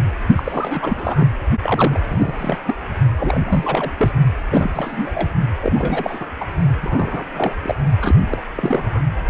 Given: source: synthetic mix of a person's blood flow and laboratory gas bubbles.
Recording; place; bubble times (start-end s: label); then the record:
Doppler ultrasound of blood flow; precordium
0.36-1.36 s: bubbles
1.60-2.00 s: bubbles
2.07-2.59 s: bubbles
2.65-2.75 s: bubbles
3.17-3.92 s: bubbles
3.97-4.12 s: bubbles
4.51-4.71 s: bubbles
4.74-5.29 s: bubbles
5.62-6.26 s: bubbles
6.41-6.46 s: bubbles
6.82-7.25 s: bubbles
7.34-7.55 s: bubbles
7.62-7.75 s: bubbles
8.01-8.15 s: bubbles
8.30-8.41 s: bubbles
8.55-9.03 s: bubbles
From the record:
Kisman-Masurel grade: 342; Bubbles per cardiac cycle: rolling drumbeat, 9 or more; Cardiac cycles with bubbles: 100%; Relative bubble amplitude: moderate (0.250 to 0.450); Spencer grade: 3 (all of the cardiac periods contain showers or single bubble signals, but not dominating or overriding the cardiac motion signals); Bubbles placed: only in the low amplitude regions of the cardiac cycle